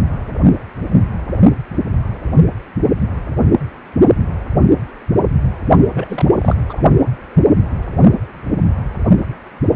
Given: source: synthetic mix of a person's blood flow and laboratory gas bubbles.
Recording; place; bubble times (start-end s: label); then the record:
Doppler ultrasound of blood flow; precordium
5.94-6.25 s: bubbles
6.40-6.55 s: bubbles
6.69-6.82 s: bubbles
From the record:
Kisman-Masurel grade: 212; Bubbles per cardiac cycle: several, 3 to 8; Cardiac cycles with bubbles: 1 to 10%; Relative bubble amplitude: moderate (0.250 to 0.450); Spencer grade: 1 (occasional bubble signal discernible with the cardiac motion signal, with majority of cardiac periods free of bubbles); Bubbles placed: only in the low amplitude regions of the cardiac cycle